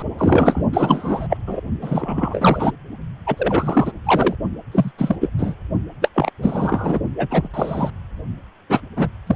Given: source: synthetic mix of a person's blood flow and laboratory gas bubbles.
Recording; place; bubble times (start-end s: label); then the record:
Doppler ultrasound of blood flow; precordium
0.00-0.03 s: bubbles
0.18-0.63 s: bubbles
0.73-1.37 s: bubbles
1.47-1.60 s: bubbles
1.82-2.72 s: bubbles
3.26-3.92 s: bubbles
4.05-4.35 s: bubbles
4.71-4.92 s: bubbles
4.98-5.16 s: bubbles
5.21-5.29 s: bubbles
5.38-5.54 s: bubbles
6.01-6.08 s: bubbles
6.15-6.31 s: bubbles
6.42-6.99 s: bubbles
7.16-7.49 s: bubbles
7.54-7.90 s: bubbles
8.69-8.80 s: bubbles
8.96-9.07 s: bubbles
9.26-9.36 s: bubbles
From the record:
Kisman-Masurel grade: 243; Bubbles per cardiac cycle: several, 3 to 8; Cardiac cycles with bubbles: 100%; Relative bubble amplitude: loud (0.450 to 0.775); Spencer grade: 3 (all of the cardiac periods contain showers or single bubble signals, but not dominating or overriding the cardiac motion signals); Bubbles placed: only in the low amplitude regions of the cardiac cycle